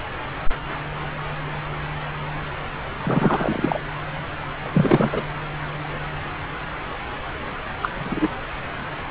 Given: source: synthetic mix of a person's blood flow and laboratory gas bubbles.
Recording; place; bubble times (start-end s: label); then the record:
Doppler ultrasound of blood flow; subclavian vein
3.00-3.80 s: bubbles
4.63-5.22 s: bubbles
7.82-7.89 s: bubbles
7.95-8.28 s: bubbles
From the record:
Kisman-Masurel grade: 223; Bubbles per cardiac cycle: several, 3 to 8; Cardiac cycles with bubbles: 10 to 50%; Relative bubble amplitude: loud (0.450 to 0.775); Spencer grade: 2 (many but less than half of the cardiac periods contain bubble signals, singularly or in groups); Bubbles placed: anywhere in the cardiac cycle